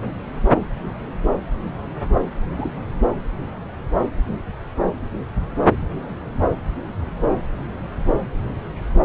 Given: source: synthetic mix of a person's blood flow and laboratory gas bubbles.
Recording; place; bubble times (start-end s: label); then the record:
Doppler ultrasound of blood flow; subclavian vein
2.56-2.72 s: bubbles
From the record:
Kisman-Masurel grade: 112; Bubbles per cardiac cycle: 1 to 2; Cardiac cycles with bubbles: 1 to 10%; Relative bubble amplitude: moderate (0.250 to 0.450); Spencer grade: 1 (occasional bubble signal discernible with the cardiac motion signal, with majority of cardiac periods free of bubbles); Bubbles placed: anywhere in the cardiac cycle